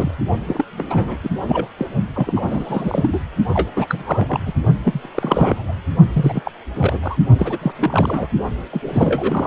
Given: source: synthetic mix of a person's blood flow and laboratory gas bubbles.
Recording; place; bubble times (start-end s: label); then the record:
Doppler ultrasound of blood flow; precordium
0.00-0.15 s: bubbles
0.46-0.65 s: bubbles
0.77-1.17 s: bubbles
1.23-1.30 s: bubbles
1.47-1.67 s: bubbles
1.78-1.85 s: bubbles
2.15-2.33 s: bubbles
2.35-3.20 s: bubbles
3.54-3.68 s: bubbles
3.76-4.40 s: bubbles
4.46-4.54 s: bubbles
4.84-5.10 s: bubbles
5.14-5.72 s: bubbles
6.12-6.40 s: bubbles
6.44-6.51 s: bubbles
6.75-6.99 s: bubbles
7.02-7.17 s: bubbles
7.38-7.58 s: bubbles
7.61-7.71 s: bubbles
7.78-8.28 s: bubbles
8.71-8.80 s: bubbles
8.85-9.47 s: bubbles
From the record:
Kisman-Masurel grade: 342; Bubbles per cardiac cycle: rolling drumbeat, 9 or more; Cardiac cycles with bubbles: 100%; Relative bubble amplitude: moderate (0.250 to 0.450); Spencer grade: 3 (all of the cardiac periods contain showers or single bubble signals, but not dominating or overriding the cardiac motion signals); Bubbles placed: only in the low amplitude regions of the cardiac cycle